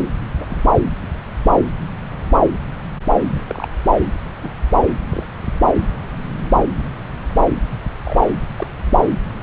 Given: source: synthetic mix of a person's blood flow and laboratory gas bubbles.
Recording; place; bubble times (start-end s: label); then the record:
Doppler ultrasound of blood flow; subclavian vein
0.39-0.45 s: bubbles
0.49-0.62 s: bubbles
3.31-3.43 s: bubbles
3.47-3.68 s: bubbles
4.43-4.50 s: bubbles
5.08-5.26 s: bubbles
7.71-7.79 s: bubbles
8.05-8.16 s: bubbles
8.57-8.66 s: bubbles
From the record:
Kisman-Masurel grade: 121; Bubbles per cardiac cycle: 1 to 2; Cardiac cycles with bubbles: 10 to 50%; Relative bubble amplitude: barely perceptible (0.100 to 0.250); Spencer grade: 2 (many but less than half of the cardiac periods contain bubble signals, singularly or in groups); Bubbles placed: anywhere in the cardiac cycle